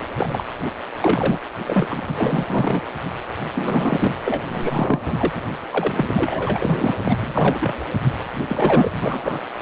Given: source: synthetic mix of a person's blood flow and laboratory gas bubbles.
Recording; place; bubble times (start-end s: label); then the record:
Doppler ultrasound of blood flow; precordium
0.19-0.44 s: bubbles
1.01-1.39 s: bubbles
1.65-2.02 s: bubbles
2.08-2.82 s: bubbles
3.54-4.16 s: bubbles
4.25-4.42 s: bubbles
4.49-5.41 s: bubbles
5.73-6.94 s: bubbles
7.03-7.15 s: bubbles
7.17-7.74 s: bubbles
8.48-8.90 s: bubbles
9.00-9.39 s: bubbles
From the record:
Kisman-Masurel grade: 342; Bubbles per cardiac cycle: rolling drumbeat, 9 or more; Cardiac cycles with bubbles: 100%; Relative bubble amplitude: moderate (0.250 to 0.450); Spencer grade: 3 (all of the cardiac periods contain showers or single bubble signals, but not dominating or overriding the cardiac motion signals); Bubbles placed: anywhere in the cardiac cycle